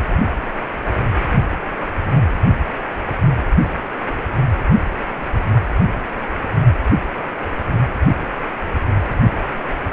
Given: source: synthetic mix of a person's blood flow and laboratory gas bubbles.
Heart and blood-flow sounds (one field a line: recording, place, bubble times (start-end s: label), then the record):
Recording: Doppler ultrasound of blood flow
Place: precordium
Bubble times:
2.13-2.21 s: bubbles
From the record:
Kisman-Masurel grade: 111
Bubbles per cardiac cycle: 1 to 2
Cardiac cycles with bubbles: 1 to 10%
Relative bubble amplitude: barely perceptible (0.100 to 0.250)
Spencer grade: 1 (occasional bubble signal discernible with the cardiac motion signal, with majority of cardiac periods free of bubbles)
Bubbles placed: anywhere in the cardiac cycle